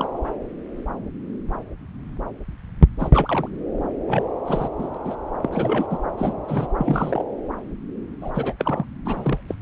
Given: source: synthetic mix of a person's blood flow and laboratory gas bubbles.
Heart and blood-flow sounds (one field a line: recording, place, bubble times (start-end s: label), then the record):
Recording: Doppler ultrasound of blood flow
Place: subclavian vein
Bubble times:
0.00-0.07 s: bubbles
3.00-3.08 s: bubbles
3.12-3.49 s: bubbles
4.07-4.22 s: bubbles
4.46-4.68 s: bubbles
4.79-4.88 s: bubbles
4.94-4.97 s: bubbles
5.05-5.15 s: bubbles
5.42-5.49 s: bubbles
5.52-5.86 s: bubbles
5.90-5.99 s: bubbles
6.17-6.34 s: bubbles
6.47-6.67 s: bubbles
6.79-7.25 s: bubbles
8.21-8.31 s: bubbles
8.35-8.53 s: bubbles
8.59-8.86 s: bubbles
9.05-9.41 s: bubbles
9.49-9.54 s: bubbles
From the record:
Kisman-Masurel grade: 232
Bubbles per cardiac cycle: several, 3 to 8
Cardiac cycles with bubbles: 50 to 99%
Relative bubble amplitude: moderate (0.250 to 0.450)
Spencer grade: 3 (all of the cardiac periods contain showers or single bubble signals, but not dominating or overriding the cardiac motion signals)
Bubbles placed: anywhere in the cardiac cycle